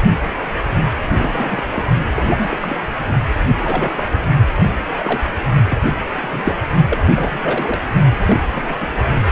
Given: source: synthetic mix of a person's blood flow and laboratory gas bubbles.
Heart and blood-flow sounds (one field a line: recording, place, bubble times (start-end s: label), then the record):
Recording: Doppler ultrasound of blood flow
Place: precordium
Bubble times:
1.18-1.63 s: bubbles
1.73-1.83 s: bubbles
2.15-2.79 s: bubbles
3.58-3.93 s: bubbles
3.96-4.07 s: bubbles
4.96-5.21 s: bubbles
5.70-5.77 s: bubbles
6.21-6.55 s: bubbles
6.88-7.02 s: bubbles
7.15-7.79 s: bubbles
8.25-8.39 s: bubbles
8.52-8.74 s: bubbles
8.79-8.88 s: bubbles
From the record:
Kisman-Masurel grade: 242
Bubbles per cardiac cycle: several, 3 to 8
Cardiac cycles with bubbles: 100%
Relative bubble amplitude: moderate (0.250 to 0.450)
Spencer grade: 3 (all of the cardiac periods contain showers or single bubble signals, but not dominating or overriding the cardiac motion signals)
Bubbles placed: only in the low amplitude regions of the cardiac cycle